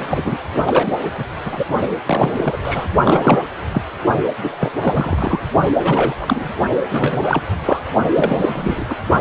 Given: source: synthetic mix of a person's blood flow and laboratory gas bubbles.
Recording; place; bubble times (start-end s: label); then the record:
Doppler ultrasound of blood flow; precordium
0.00-0.38 s: bubbles
0.67-0.97 s: bubbles
1.18-1.24 s: bubbles
1.44-1.64 s: bubbles
2.06-2.57 s: bubbles
2.62-2.86 s: bubbles
3.04-3.40 s: bubbles
3.72-3.82 s: bubbles
4.43-4.50 s: bubbles
4.60-4.71 s: bubbles
4.79-5.40 s: bubbles
5.78-6.16 s: bubbles
6.21-6.49 s: bubbles
6.89-7.42 s: bubbles
7.66-7.83 s: bubbles
8.15-8.86 s: bubbles
8.89-8.96 s: bubbles
From the record:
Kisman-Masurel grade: 343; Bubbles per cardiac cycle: rolling drumbeat, 9 or more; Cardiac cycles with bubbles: 100%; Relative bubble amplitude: loud (0.450 to 0.775); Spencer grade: 3 (all of the cardiac periods contain showers or single bubble signals, but not dominating or overriding the cardiac motion signals); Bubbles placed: only in the low amplitude regions of the cardiac cycle